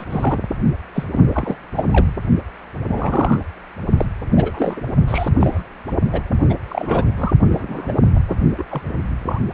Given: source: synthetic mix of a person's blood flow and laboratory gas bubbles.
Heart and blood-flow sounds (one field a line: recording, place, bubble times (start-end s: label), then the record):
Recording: Doppler ultrasound of blood flow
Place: precordium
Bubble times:
0.00-0.04 s: bubbles
0.09-0.38 s: bubbles
0.94-1.04 s: bubbles
1.33-1.56 s: bubbles
1.75-1.84 s: bubbles
1.91-2.12 s: bubbles
2.88-3.42 s: bubbles
3.97-4.05 s: bubbles
4.32-4.81 s: bubbles
5.08-5.29 s: bubbles
5.39-5.63 s: bubbles
6.12-6.21 s: bubbles
6.50-6.55 s: bubbles
6.68-7.05 s: bubbles
7.17-7.33 s: bubbles
7.53-7.92 s: bubbles
8.15-8.19 s: bubbles
8.28-8.37 s: bubbles
8.57-8.65 s: bubbles
8.70-8.90 s: bubbles
9.26-9.40 s: bubbles
From the record:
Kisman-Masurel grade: 242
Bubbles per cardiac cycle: several, 3 to 8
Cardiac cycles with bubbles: 100%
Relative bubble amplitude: moderate (0.250 to 0.450)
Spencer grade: 3 (all of the cardiac periods contain showers or single bubble signals, but not dominating or overriding the cardiac motion signals)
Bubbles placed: only in the low amplitude regions of the cardiac cycle